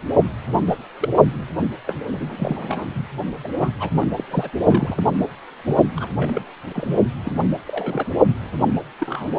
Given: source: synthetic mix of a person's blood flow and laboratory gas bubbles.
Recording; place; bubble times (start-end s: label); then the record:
Doppler ultrasound of blood flow; precordium
0.53-0.75 s: bubbles
1.00-1.09 s: bubbles
1.87-1.95 s: bubbles
2.11-3.04 s: bubbles
3.44-3.47 s: bubbles
3.59-3.70 s: bubbles
3.79-3.89 s: bubbles
3.99-4.08 s: bubbles
4.16-4.23 s: bubbles
4.28-4.50 s: bubbles
4.61-5.03 s: bubbles
5.64-5.75 s: bubbles
5.96-6.08 s: bubbles
6.15-6.43 s: bubbles
6.73-6.99 s: bubbles
7.25-7.44 s: bubbles
7.67-8.09 s: bubbles
8.99-9.29 s: bubbles
From the record:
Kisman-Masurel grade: 232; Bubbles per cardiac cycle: several, 3 to 8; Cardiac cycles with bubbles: 50 to 99%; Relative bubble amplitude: moderate (0.250 to 0.450); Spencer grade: 3 (all of the cardiac periods contain showers or single bubble signals, but not dominating or overriding the cardiac motion signals); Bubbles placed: anywhere in the cardiac cycle